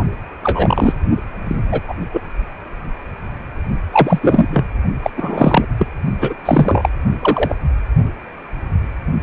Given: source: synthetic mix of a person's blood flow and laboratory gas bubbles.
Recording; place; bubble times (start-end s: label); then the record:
Doppler ultrasound of blood flow; precordium
0.43-0.95 s: bubbles
1.45-1.61 s: bubbles
1.71-1.81 s: bubbles
1.88-1.94 s: bubbles
2.13-2.21 s: bubbles
3.92-4.19 s: bubbles
4.21-4.46 s: bubbles
4.50-4.66 s: bubbles
5.03-5.11 s: bubbles
5.17-5.65 s: bubbles
5.78-5.87 s: bubbles
6.21-6.33 s: bubbles
6.45-6.89 s: bubbles
7.21-7.55 s: bubbles
From the record:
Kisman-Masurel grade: 233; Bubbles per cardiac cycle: several, 3 to 8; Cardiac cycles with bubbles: 50 to 99%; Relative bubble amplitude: loud (0.450 to 0.775); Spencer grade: 3 (all of the cardiac periods contain showers or single bubble signals, but not dominating or overriding the cardiac motion signals); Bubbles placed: only in the low amplitude regions of the cardiac cycle